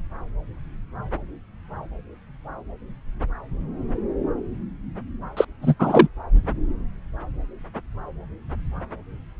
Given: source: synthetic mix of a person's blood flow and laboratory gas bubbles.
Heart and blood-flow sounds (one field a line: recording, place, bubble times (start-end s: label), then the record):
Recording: Doppler ultrasound of blood flow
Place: subclavian vein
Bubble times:
5.37-5.45 s: bubbles
5.62-5.75 s: bubbles
5.79-6.08 s: bubbles
From the record:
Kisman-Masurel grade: 213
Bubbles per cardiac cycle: several, 3 to 8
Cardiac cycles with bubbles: 1 to 10%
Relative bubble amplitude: loud (0.450 to 0.775)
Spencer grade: 1 (occasional bubble signal discernible with the cardiac motion signal, with majority of cardiac periods free of bubbles)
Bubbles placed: anywhere in the cardiac cycle